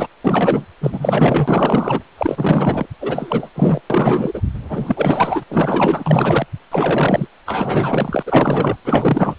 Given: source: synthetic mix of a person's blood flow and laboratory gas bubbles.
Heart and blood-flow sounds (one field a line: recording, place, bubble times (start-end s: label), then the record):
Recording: Doppler ultrasound of blood flow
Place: precordium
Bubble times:
0.00-0.07 s: bubbles
0.25-0.65 s: bubbles
0.80-2.02 s: bubbles
2.18-2.85 s: bubbles
3.00-3.50 s: bubbles
3.54-3.81 s: bubbles
3.90-4.42 s: bubbles
4.69-5.43 s: bubbles
5.48-6.46 s: bubbles
6.71-7.28 s: bubbles
7.46-8.22 s: bubbles
8.25-8.76 s: bubbles
8.85-9.35 s: bubbles
From the record:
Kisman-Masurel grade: 444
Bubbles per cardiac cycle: continuous sound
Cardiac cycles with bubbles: 100%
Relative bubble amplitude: maximal (0.775 to 0.999)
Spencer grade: 4 (maximum detectable bubble signal sounding continuously throughout systole and diastole of every cardiac period, and overriding the amplitude of the normal cardiac signals)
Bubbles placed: anywhere in the cardiac cycle